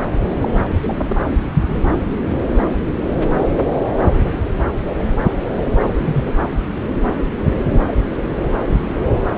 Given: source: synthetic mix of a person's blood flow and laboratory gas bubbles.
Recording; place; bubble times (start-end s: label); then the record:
Doppler ultrasound of blood flow; subclavian vein
0.41-0.50 s: bubbles
0.85-1.16 s: bubbles
4.32-4.42 s: bubbles
4.98-5.04 s: bubbles
5.98-6.31 s: bubbles
From the record:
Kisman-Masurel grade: 122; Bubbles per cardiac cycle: 1 to 2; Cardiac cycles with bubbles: 10 to 50%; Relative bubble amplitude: moderate (0.250 to 0.450); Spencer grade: 2 (many but less than half of the cardiac periods contain bubble signals, singularly or in groups); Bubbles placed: anywhere in the cardiac cycle